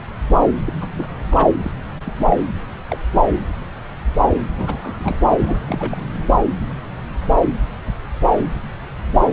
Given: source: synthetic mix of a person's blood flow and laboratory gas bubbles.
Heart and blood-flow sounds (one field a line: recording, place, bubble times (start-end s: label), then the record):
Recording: Doppler ultrasound of blood flow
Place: subclavian vein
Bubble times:
0.58-0.73 s: bubbles
0.80-0.87 s: bubbles
0.94-1.08 s: bubbles
1.29-1.49 s: bubbles
1.63-1.72 s: bubbles
2.05-2.14 s: bubbles
2.17-2.37 s: bubbles
2.89-2.98 s: bubbles
3.12-3.23 s: bubbles
4.57-5.20 s: bubbles
5.29-5.59 s: bubbles
5.68-6.06 s: bubbles
From the record:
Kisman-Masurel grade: 221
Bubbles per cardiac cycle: several, 3 to 8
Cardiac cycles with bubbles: 10 to 50%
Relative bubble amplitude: barely perceptible (0.100 to 0.250)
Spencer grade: 2 (many but less than half of the cardiac periods contain bubble signals, singularly or in groups)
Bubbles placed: anywhere in the cardiac cycle